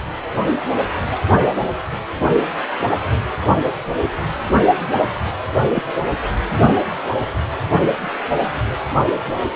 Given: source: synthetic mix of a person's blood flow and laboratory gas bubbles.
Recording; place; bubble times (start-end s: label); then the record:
Doppler ultrasound of blood flow; precordium
5.75-5.83 s: bubbles
From the record:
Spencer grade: 2 (many but less than half of the cardiac periods contain bubble signals, singularly or in groups); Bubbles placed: anywhere in the cardiac cycle